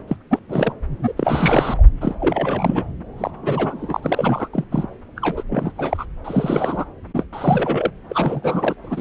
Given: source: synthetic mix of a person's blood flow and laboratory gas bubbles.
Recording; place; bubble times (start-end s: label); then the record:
Doppler ultrasound of blood flow; subclavian vein
0.07-0.17 s: bubbles
0.30-0.39 s: bubbles
0.48-0.73 s: bubbles
1.02-1.12 s: bubbles
1.17-1.83 s: bubbles
2.00-2.15 s: bubbles
2.20-2.84 s: bubbles
3.17-3.31 s: bubbles
3.43-4.00 s: bubbles
4.02-4.48 s: bubbles
4.53-4.64 s: bubbles
4.71-4.87 s: bubbles
5.16-5.43 s: bubbles
5.49-5.71 s: bubbles
5.78-6.05 s: bubbles
6.25-6.84 s: bubbles
7.14-7.25 s: bubbles
7.33-7.90 s: bubbles
8.09-8.74 s: bubbles
8.84-9.01 s: bubbles
From the record:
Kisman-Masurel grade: 342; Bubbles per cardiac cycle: rolling drumbeat, 9 or more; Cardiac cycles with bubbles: 100%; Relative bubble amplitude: moderate (0.250 to 0.450); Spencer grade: 3 (all of the cardiac periods contain showers or single bubble signals, but not dominating or overriding the cardiac motion signals); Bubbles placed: anywhere in the cardiac cycle